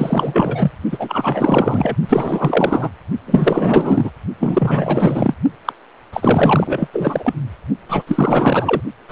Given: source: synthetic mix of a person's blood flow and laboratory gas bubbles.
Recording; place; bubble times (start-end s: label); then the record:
Doppler ultrasound of blood flow; precordium
0.00-0.71 s: bubbles
0.92-1.95 s: bubbles
2.09-2.89 s: bubbles
3.26-4.11 s: bubbles
4.39-5.34 s: bubbles
5.65-5.72 s: bubbles
6.12-6.88 s: bubbles
6.93-7.34 s: bubbles
7.88-8.03 s: bubbles
8.07-8.81 s: bubbles
9.08-9.12 s: bubbles
From the record:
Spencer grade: 4 (maximum detectable bubble signal sounding continuously throughout systole and diastole of every cardiac period, and overriding the amplitude of the normal cardiac signals); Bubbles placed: only in the low amplitude regions of the cardiac cycle